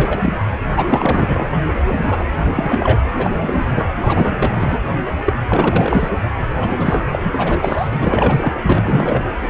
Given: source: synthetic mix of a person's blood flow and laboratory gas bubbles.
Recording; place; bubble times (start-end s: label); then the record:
Doppler ultrasound of blood flow; precordium
0.00-0.35 s: bubbles
0.76-1.59 s: bubbles
1.86-2.27 s: bubbles
2.52-3.01 s: bubbles
3.15-3.31 s: bubbles
3.42-3.88 s: bubbles
4.02-4.82 s: bubbles
5.25-5.33 s: bubbles
5.48-6.09 s: bubbles
6.59-7.88 s: bubbles
7.92-8.54 s: bubbles
8.65-9.23 s: bubbles
From the record:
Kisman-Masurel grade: 343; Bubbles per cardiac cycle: rolling drumbeat, 9 or more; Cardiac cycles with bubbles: 100%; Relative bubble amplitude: loud (0.450 to 0.775); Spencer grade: 3 (all of the cardiac periods contain showers or single bubble signals, but not dominating or overriding the cardiac motion signals); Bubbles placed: anywhere in the cardiac cycle